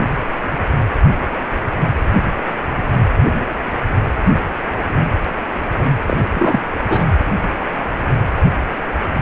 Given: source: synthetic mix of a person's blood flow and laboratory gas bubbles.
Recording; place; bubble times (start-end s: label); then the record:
Doppler ultrasound of blood flow; precordium
6.07-6.18 s: bubbles
6.27-6.63 s: bubbles
6.88-7.11 s: bubbles
From the record:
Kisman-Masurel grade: 222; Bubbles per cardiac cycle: several, 3 to 8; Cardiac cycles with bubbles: 10 to 50%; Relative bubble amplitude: moderate (0.250 to 0.450); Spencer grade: 2 (many but less than half of the cardiac periods contain bubble signals, singularly or in groups); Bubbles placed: anywhere in the cardiac cycle